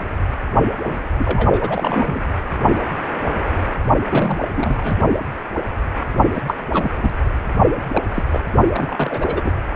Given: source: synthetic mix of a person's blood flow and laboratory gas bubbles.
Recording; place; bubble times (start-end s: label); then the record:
Doppler ultrasound of blood flow; precordium
0.85-0.99 s: bubbles
1.19-2.22 s: bubbles
4.08-4.48 s: bubbles
4.56-4.96 s: bubbles
6.33-6.42 s: bubbles
6.47-6.55 s: bubbles
6.73-7.10 s: bubbles
7.94-8.03 s: bubbles
8.14-8.23 s: bubbles
8.30-8.40 s: bubbles
8.72-9.51 s: bubbles
From the record:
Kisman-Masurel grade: 222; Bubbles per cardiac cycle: several, 3 to 8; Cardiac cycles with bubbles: 10 to 50%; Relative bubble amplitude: moderate (0.250 to 0.450); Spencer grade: 2 (many but less than half of the cardiac periods contain bubble signals, singularly or in groups); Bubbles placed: only in the low amplitude regions of the cardiac cycle